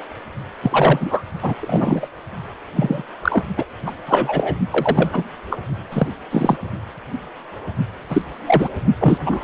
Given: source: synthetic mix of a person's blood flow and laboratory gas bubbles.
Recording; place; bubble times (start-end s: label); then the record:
Doppler ultrasound of blood flow; precordium
0.62-1.23 s: bubbles
1.42-1.54 s: bubbles
1.60-2.08 s: bubbles
2.76-3.03 s: bubbles
3.22-3.44 s: bubbles
3.56-3.64 s: bubbles
3.86-3.92 s: bubbles
4.07-4.55 s: bubbles
4.71-5.23 s: bubbles
5.50-5.58 s: bubbles
5.91-6.07 s: bubbles
6.30-6.57 s: bubbles
8.10-8.22 s: bubbles
8.46-8.70 s: bubbles
9.00-9.18 s: bubbles
9.26-9.43 s: bubbles
From the record:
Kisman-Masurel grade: 243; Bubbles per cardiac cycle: several, 3 to 8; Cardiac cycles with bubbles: 100%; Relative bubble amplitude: loud (0.450 to 0.775); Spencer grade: 3 (all of the cardiac periods contain showers or single bubble signals, but not dominating or overriding the cardiac motion signals); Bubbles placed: only in the low amplitude regions of the cardiac cycle